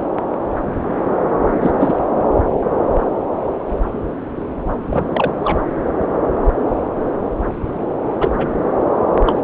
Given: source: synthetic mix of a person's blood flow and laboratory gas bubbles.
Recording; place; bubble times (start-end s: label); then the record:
Doppler ultrasound of blood flow; subclavian vein
1.61-1.71 s: bubbles
1.80-1.94 s: bubbles
4.90-5.03 s: bubbles
5.12-5.33 s: bubbles
5.38-5.59 s: bubbles
8.21-8.31 s: bubbles
8.38-8.49 s: bubbles
9.26-9.44 s: bubbles
From the record:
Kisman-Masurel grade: 222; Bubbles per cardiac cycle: several, 3 to 8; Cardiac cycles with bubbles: 10 to 50%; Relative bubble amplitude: moderate (0.250 to 0.450); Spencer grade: 2 (many but less than half of the cardiac periods contain bubble signals, singularly or in groups); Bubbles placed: anywhere in the cardiac cycle